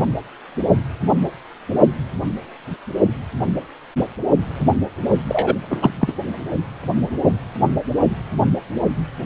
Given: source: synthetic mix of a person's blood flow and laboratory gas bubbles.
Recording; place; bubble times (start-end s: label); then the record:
Doppler ultrasound of blood flow; precordium
5.27-5.55 s: bubbles
5.70-5.90 s: bubbles
5.99-6.13 s: bubbles
From the record:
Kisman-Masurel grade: 213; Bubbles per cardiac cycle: several, 3 to 8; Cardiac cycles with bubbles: 1 to 10%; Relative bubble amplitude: loud (0.450 to 0.775); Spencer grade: 1 (occasional bubble signal discernible with the cardiac motion signal, with majority of cardiac periods free of bubbles); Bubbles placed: only in the low amplitude regions of the cardiac cycle